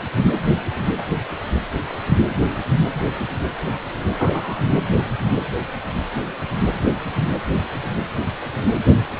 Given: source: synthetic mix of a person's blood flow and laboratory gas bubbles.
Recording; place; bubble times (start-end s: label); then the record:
Doppler ultrasound of blood flow; precordium
4.17-4.56 s: bubbles
From the record:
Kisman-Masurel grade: 112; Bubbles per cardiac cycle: 1 to 2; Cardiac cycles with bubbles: 1 to 10%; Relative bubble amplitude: moderate (0.250 to 0.450); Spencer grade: 1 (occasional bubble signal discernible with the cardiac motion signal, with majority of cardiac periods free of bubbles); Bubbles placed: anywhere in the cardiac cycle